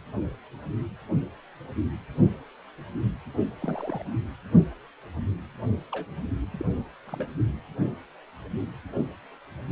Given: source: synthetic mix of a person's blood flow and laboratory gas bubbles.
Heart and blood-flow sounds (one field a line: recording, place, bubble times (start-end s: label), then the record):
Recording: Doppler ultrasound of blood flow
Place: precordium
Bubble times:
3.62-4.02 s: bubbles
5.92-6.06 s: bubbles
6.51-6.65 s: bubbles
7.07-7.33 s: bubbles
From the record:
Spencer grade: 2 (many but less than half of the cardiac periods contain bubble signals, singularly or in groups)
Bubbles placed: only in the low amplitude regions of the cardiac cycle